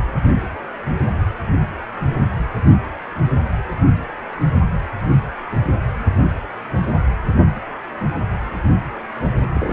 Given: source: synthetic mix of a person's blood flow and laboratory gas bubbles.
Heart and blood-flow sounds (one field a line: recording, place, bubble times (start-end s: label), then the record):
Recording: Doppler ultrasound of blood flow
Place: precordium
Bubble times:
9.54-9.73 s: bubbles
From the record:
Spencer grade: 1 (occasional bubble signal discernible with the cardiac motion signal, with majority of cardiac periods free of bubbles)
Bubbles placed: anywhere in the cardiac cycle